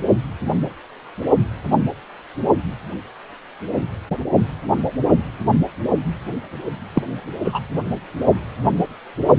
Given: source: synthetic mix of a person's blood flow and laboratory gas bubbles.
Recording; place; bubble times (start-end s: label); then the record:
Doppler ultrasound of blood flow; precordium
6.94-7.03 s: bubbles
7.44-7.61 s: bubbles
From the record:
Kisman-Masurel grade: 223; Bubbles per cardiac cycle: several, 3 to 8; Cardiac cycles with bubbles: 10 to 50%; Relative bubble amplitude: loud (0.450 to 0.775); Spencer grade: 2 (many but less than half of the cardiac periods contain bubble signals, singularly or in groups); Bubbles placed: only in the low amplitude regions of the cardiac cycle